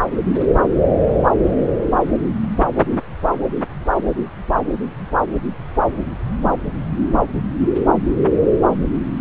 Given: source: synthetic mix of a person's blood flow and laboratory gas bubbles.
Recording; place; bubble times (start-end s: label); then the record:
Doppler ultrasound of blood flow; subclavian vein
no bubbles
From the record:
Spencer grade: 0 (complete lack of bubble signals)